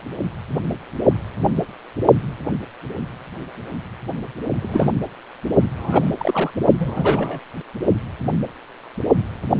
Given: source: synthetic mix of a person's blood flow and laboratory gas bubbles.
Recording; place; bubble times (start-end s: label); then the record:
Doppler ultrasound of blood flow; precordium
4.60-4.91 s: bubbles
5.79-6.10 s: bubbles
6.17-6.51 s: bubbles
6.79-7.39 s: bubbles
From the record:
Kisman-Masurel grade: 222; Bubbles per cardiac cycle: several, 3 to 8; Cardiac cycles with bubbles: 10 to 50%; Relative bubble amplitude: moderate (0.250 to 0.450); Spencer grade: 2 (many but less than half of the cardiac periods contain bubble signals, singularly or in groups); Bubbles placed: only in the low amplitude regions of the cardiac cycle